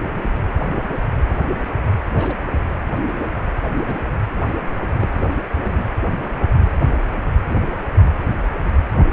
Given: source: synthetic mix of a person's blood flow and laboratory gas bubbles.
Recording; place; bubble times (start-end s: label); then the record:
Doppler ultrasound of blood flow; precordium
2.17-2.36 s: bubbles
3.87-3.94 s: bubbles
4.92-5.28 s: bubbles
5.65-5.84 s: bubbles
7.50-7.56 s: bubbles
7.96-8.04 s: bubbles
From the record:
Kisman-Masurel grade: 121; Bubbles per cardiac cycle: 1 to 2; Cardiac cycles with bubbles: 10 to 50%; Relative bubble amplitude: barely perceptible (0.100 to 0.250); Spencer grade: 2 (many but less than half of the cardiac periods contain bubble signals, singularly or in groups); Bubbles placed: anywhere in the cardiac cycle